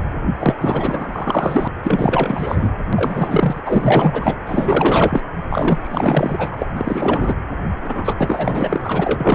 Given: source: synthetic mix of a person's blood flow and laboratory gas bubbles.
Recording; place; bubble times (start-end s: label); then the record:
Doppler ultrasound of blood flow; precordium
0.40-0.54 s: bubbles
0.60-1.68 s: bubbles
1.83-2.73 s: bubbles
2.92-3.60 s: bubbles
3.65-4.37 s: bubbles
4.46-5.21 s: bubbles
5.50-6.66 s: bubbles
6.76-7.35 s: bubbles
7.81-8.15 s: bubbles
8.18-9.35 s: bubbles
From the record:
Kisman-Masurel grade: 444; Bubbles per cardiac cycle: continuous sound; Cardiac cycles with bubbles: 100%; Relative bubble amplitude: maximal (0.775 to 0.999); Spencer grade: 4 (maximum detectable bubble signal sounding continuously throughout systole and diastole of every cardiac period, and overriding the amplitude of the normal cardiac signals); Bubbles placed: anywhere in the cardiac cycle